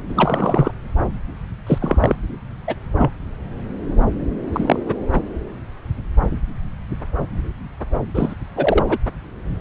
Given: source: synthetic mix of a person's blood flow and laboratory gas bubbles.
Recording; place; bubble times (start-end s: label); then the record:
Doppler ultrasound of blood flow; subclavian vein
0.09-0.71 s: bubbles
1.67-2.15 s: bubbles
2.67-2.75 s: bubbles
2.98-3.11 s: bubbles
4.52-4.78 s: bubbles
4.86-4.95 s: bubbles
5.15-5.22 s: bubbles
8.14-8.34 s: bubbles
8.56-8.97 s: bubbles
From the record:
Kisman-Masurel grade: 233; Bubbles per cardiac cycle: several, 3 to 8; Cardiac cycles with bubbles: 50 to 99%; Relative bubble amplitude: loud (0.450 to 0.775); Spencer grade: 3 (all of the cardiac periods contain showers or single bubble signals, but not dominating or overriding the cardiac motion signals); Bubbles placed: anywhere in the cardiac cycle